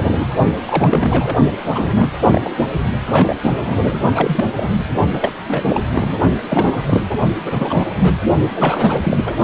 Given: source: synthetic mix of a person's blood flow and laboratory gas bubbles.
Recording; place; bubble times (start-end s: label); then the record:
Doppler ultrasound of blood flow; precordium
0.03-0.26 s: bubbles
0.66-1.37 s: bubbles
1.72-2.11 s: bubbles
2.21-2.51 s: bubbles
2.57-2.67 s: bubbles
3.12-3.36 s: bubbles
3.42-3.84 s: bubbles
3.87-4.00 s: bubbles
4.14-4.45 s: bubbles
4.55-4.89 s: bubbles
5.12-5.31 s: bubbles
5.47-5.80 s: bubbles
5.92-6.19 s: bubbles
6.48-7.03 s: bubbles
7.46-8.20 s: bubbles
8.54-9.38 s: bubbles
From the record:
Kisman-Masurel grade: 342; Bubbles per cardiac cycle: rolling drumbeat, 9 or more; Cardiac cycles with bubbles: 100%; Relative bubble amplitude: moderate (0.250 to 0.450); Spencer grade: 3 (all of the cardiac periods contain showers or single bubble signals, but not dominating or overriding the cardiac motion signals); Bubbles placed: only in the low amplitude regions of the cardiac cycle